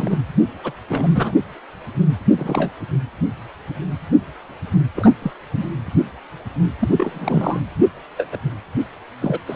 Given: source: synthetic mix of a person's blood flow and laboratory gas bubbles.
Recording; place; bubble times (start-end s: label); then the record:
Doppler ultrasound of blood flow; precordium
0.00-0.16 s: bubbles
0.64-0.71 s: bubbles
0.89-1.08 s: bubbles
1.14-1.32 s: bubbles
2.25-2.70 s: bubbles
4.96-5.11 s: bubbles
5.22-5.31 s: bubbles
5.55-5.63 s: bubbles
6.79-6.89 s: bubbles
6.92-7.60 s: bubbles
8.17-8.27 s: bubbles
8.32-8.37 s: bubbles
9.21-9.38 s: bubbles
9.48-9.56 s: bubbles
From the record:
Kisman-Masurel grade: 232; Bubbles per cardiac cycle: several, 3 to 8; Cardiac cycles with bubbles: 50 to 99%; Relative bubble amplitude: moderate (0.250 to 0.450); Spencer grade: 3 (all of the cardiac periods contain showers or single bubble signals, but not dominating or overriding the cardiac motion signals); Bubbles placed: anywhere in the cardiac cycle